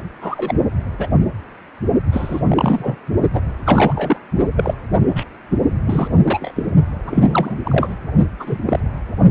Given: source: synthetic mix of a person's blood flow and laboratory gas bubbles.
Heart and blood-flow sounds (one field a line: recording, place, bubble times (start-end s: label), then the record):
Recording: Doppler ultrasound of blood flow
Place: precordium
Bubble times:
0.21-0.60 s: bubbles
0.99-1.07 s: bubbles
2.12-2.42 s: bubbles
2.46-2.96 s: bubbles
3.33-3.41 s: bubbles
3.65-4.19 s: bubbles
4.56-4.74 s: bubbles
5.16-5.24 s: bubbles
5.86-6.09 s: bubbles
6.26-6.51 s: bubbles
6.55-6.67 s: bubbles
7.07-7.58 s: bubbles
7.64-7.96 s: bubbles
8.39-8.58 s: bubbles
8.66-8.80 s: bubbles
From the record:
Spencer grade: 3 (all of the cardiac periods contain showers or single bubble signals, but not dominating or overriding the cardiac motion signals)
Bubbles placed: only in the low amplitude regions of the cardiac cycle